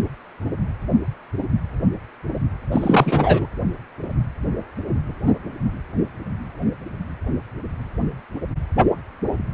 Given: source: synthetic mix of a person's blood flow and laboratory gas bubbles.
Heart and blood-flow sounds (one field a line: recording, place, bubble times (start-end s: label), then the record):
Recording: Doppler ultrasound of blood flow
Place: precordium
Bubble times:
2.72-3.47 s: bubbles
From the record:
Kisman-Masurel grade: 223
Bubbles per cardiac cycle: several, 3 to 8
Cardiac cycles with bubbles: 10 to 50%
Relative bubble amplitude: loud (0.450 to 0.775)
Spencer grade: 2 (many but less than half of the cardiac periods contain bubble signals, singularly or in groups)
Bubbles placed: anywhere in the cardiac cycle